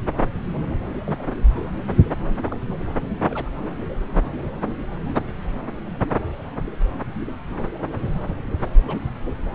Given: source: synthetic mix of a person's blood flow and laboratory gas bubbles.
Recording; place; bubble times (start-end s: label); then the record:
Doppler ultrasound of blood flow; subclavian vein
1.04-1.17 s: bubbles
1.19-1.25 s: bubbles
2.47-2.54 s: bubbles
3.26-3.51 s: bubbles
5.15-5.19 s: bubbles
8.26-8.36 s: bubbles
8.88-8.98 s: bubbles
From the record:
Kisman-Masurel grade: 121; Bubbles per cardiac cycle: 1 to 2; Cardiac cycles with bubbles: 10 to 50%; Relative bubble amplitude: barely perceptible (0.100 to 0.250); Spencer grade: 2 (many but less than half of the cardiac periods contain bubble signals, singularly or in groups); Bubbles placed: anywhere in the cardiac cycle